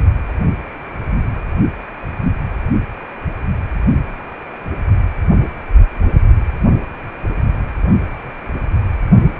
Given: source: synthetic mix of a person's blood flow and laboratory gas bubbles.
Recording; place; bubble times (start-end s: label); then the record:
Doppler ultrasound of blood flow; precordium
no bubbles
From the record:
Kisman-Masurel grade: 000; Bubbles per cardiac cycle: 0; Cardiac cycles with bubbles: 0%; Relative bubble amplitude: no bubbles discernible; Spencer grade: 0 (complete lack of bubble signals)